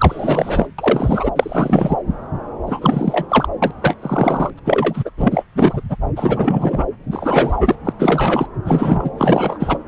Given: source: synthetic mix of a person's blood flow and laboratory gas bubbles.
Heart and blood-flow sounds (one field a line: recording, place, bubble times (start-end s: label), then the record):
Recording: Doppler ultrasound of blood flow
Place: subclavian vein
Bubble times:
0.00-0.67 s: bubbles
0.78-1.31 s: bubbles
1.35-1.97 s: bubbles
2.66-3.47 s: bubbles
3.62-3.71 s: bubbles
3.82-3.96 s: bubbles
4.02-4.50 s: bubbles
4.57-4.59 s: bubbles
4.65-5.10 s: bubbles
5.17-5.44 s: bubbles
5.56-5.81 s: bubbles
5.89-5.96 s: bubbles
6.16-6.85 s: bubbles
7.11-7.57 s: bubbles
7.60-7.75 s: bubbles
7.84-7.93 s: bubbles
7.99-8.47 s: bubbles
8.64-9.09 s: bubbles
9.17-9.79 s: bubbles
From the record:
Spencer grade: 3 (all of the cardiac periods contain showers or single bubble signals, but not dominating or overriding the cardiac motion signals)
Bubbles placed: anywhere in the cardiac cycle